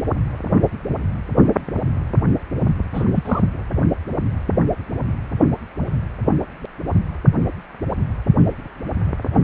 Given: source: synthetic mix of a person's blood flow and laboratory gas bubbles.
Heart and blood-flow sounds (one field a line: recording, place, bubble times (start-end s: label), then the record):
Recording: Doppler ultrasound of blood flow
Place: precordium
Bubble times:
2.94-3.05 s: bubbles
3.15-3.42 s: bubbles
From the record:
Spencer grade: 1 (occasional bubble signal discernible with the cardiac motion signal, with majority of cardiac periods free of bubbles)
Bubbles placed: anywhere in the cardiac cycle